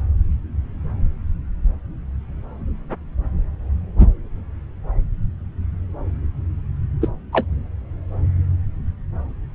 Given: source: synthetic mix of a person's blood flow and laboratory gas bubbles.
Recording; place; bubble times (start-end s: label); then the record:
Doppler ultrasound of blood flow; subclavian vein
7.01-7.08 s: bubbles
7.33-7.46 s: bubbles
From the record:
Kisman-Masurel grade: 113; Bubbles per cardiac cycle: 1 to 2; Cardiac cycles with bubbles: 1 to 10%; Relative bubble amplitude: loud (0.450 to 0.775); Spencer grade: 1 (occasional bubble signal discernible with the cardiac motion signal, with majority of cardiac periods free of bubbles); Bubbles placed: anywhere in the cardiac cycle